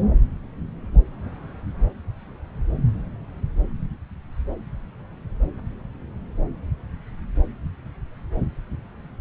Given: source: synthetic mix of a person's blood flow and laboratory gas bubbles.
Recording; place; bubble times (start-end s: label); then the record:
Doppler ultrasound of blood flow; subclavian vein
no bubbles
From the record:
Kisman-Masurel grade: 000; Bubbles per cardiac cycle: 0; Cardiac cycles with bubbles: 0%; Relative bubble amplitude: no bubbles discernible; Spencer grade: 0 (complete lack of bubble signals)